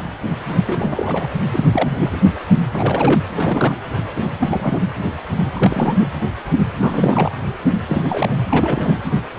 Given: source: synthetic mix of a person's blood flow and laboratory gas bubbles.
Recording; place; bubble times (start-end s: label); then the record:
Doppler ultrasound of blood flow; precordium
0.66-1.30 s: bubbles
1.52-2.18 s: bubbles
2.72-3.20 s: bubbles
3.35-3.76 s: bubbles
4.40-4.81 s: bubbles
5.53-6.08 s: bubbles
6.74-7.30 s: bubbles
7.88-8.36 s: bubbles
8.49-8.98 s: bubbles
From the record:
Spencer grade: 3 (all of the cardiac periods contain showers or single bubble signals, but not dominating or overriding the cardiac motion signals); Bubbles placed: anywhere in the cardiac cycle